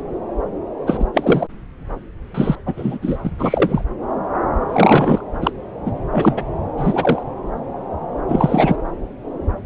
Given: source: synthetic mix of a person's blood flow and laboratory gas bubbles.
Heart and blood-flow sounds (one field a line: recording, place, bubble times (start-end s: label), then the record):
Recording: Doppler ultrasound of blood flow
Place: subclavian vein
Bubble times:
0.86-1.05 s: bubbles
1.14-1.47 s: bubbles
2.34-2.56 s: bubbles
2.66-2.99 s: bubbles
3.02-3.17 s: bubbles
3.25-3.31 s: bubbles
3.39-3.84 s: bubbles
4.69-5.23 s: bubbles
5.42-5.51 s: bubbles
5.85-5.92 s: bubbles
6.11-6.45 s: bubbles
6.77-7.23 s: bubbles
8.27-8.76 s: bubbles
From the record:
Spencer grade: 3 (all of the cardiac periods contain showers or single bubble signals, but not dominating or overriding the cardiac motion signals)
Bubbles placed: anywhere in the cardiac cycle